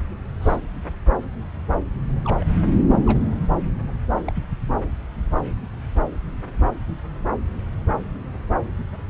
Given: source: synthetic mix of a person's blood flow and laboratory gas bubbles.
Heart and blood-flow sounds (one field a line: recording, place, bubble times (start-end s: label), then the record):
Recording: Doppler ultrasound of blood flow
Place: subclavian vein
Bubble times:
0.41-0.57 s: bubbles
2.25-2.46 s: bubbles
3.06-3.20 s: bubbles
4.25-4.32 s: bubbles
4.34-4.43 s: bubbles
From the record:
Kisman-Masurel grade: 121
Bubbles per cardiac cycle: 1 to 2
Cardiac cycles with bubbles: 10 to 50%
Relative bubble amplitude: barely perceptible (0.100 to 0.250)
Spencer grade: 2 (many but less than half of the cardiac periods contain bubble signals, singularly or in groups)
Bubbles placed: anywhere in the cardiac cycle